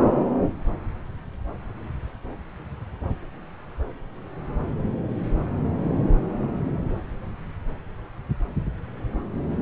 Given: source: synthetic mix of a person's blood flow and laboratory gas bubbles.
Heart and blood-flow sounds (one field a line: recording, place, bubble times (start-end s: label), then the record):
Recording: Doppler ultrasound of blood flow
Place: subclavian vein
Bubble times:
0.00-0.07 s: bubbles
From the record:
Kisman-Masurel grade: 111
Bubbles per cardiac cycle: 1 to 2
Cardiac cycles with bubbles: 1 to 10%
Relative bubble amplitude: barely perceptible (0.100 to 0.250)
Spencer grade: 1 (occasional bubble signal discernible with the cardiac motion signal, with majority of cardiac periods free of bubbles)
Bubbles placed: anywhere in the cardiac cycle